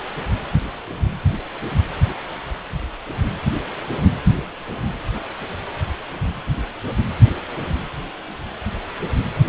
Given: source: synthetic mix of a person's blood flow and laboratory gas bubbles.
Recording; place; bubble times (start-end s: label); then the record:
Doppler ultrasound of blood flow; precordium
no bubbles
From the record:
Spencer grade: 0 (complete lack of bubble signals)